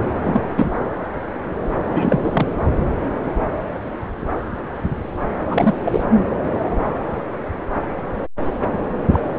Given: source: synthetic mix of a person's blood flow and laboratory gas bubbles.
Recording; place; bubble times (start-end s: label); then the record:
Doppler ultrasound of blood flow; subclavian vein
0.22-0.41 s: bubbles
0.56-0.70 s: bubbles
1.69-2.21 s: bubbles
2.23-2.46 s: bubbles
5.50-5.73 s: bubbles
5.84-6.04 s: bubbles
9.13-9.20 s: bubbles
From the record:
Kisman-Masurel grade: 222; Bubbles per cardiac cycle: several, 3 to 8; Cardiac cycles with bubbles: 10 to 50%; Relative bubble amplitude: moderate (0.250 to 0.450); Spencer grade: 2 (many but less than half of the cardiac periods contain bubble signals, singularly or in groups); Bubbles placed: anywhere in the cardiac cycle